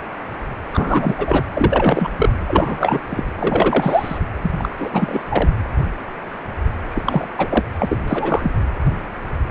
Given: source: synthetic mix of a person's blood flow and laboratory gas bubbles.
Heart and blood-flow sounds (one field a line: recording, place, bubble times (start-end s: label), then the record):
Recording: Doppler ultrasound of blood flow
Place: precordium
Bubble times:
0.74-1.44 s: bubbles
1.54-2.10 s: bubbles
2.17-2.29 s: bubbles
2.46-3.00 s: bubbles
3.09-3.24 s: bubbles
3.35-4.18 s: bubbles
4.42-4.51 s: bubbles
4.57-4.69 s: bubbles
4.77-4.89 s: bubbles
4.92-5.23 s: bubbles
5.29-5.49 s: bubbles
6.89-7.28 s: bubbles
7.38-7.64 s: bubbles
7.79-8.00 s: bubbles
8.08-8.51 s: bubbles
From the record:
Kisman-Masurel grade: 333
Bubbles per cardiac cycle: rolling drumbeat, 9 or more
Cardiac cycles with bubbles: 50 to 99%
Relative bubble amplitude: loud (0.450 to 0.775)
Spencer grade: 3 (all of the cardiac periods contain showers or single bubble signals, but not dominating or overriding the cardiac motion signals)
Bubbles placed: anywhere in the cardiac cycle